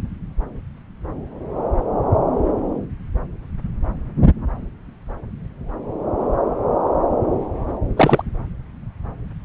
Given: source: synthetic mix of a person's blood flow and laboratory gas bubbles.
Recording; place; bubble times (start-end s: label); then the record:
Doppler ultrasound of blood flow; subclavian vein
7.96-8.22 s: bubbles
From the record:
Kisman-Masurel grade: 113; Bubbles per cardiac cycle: 1 to 2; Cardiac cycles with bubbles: 1 to 10%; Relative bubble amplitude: loud (0.450 to 0.775); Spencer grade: 1 (occasional bubble signal discernible with the cardiac motion signal, with majority of cardiac periods free of bubbles); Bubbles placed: anywhere in the cardiac cycle